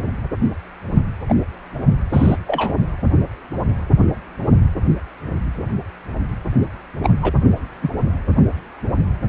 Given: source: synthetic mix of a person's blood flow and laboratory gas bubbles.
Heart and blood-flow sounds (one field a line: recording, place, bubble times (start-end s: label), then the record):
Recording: Doppler ultrasound of blood flow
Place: precordium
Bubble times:
1.28-1.34 s: bubbles
2.12-2.37 s: bubbles
2.47-2.73 s: bubbles
7.04-7.13 s: bubbles
7.22-7.33 s: bubbles
7.82-7.89 s: bubbles
From the record:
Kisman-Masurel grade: 123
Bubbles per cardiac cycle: 1 to 2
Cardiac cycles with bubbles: 10 to 50%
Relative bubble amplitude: loud (0.450 to 0.775)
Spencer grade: 2 (many but less than half of the cardiac periods contain bubble signals, singularly or in groups)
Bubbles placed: only in the low amplitude regions of the cardiac cycle